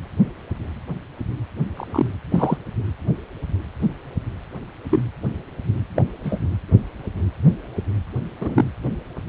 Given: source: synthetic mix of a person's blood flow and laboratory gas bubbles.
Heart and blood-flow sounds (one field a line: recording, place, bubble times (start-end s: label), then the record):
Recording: Doppler ultrasound of blood flow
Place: precordium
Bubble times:
1.75-2.10 s: bubbles
2.30-2.58 s: bubbles
4.91-5.03 s: bubbles
5.96-6.04 s: bubbles
6.24-6.39 s: bubbles
8.40-8.65 s: bubbles
From the record:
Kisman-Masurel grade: 123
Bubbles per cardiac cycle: 1 to 2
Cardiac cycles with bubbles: 10 to 50%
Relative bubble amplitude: loud (0.450 to 0.775)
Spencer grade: 2 (many but less than half of the cardiac periods contain bubble signals, singularly or in groups)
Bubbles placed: anywhere in the cardiac cycle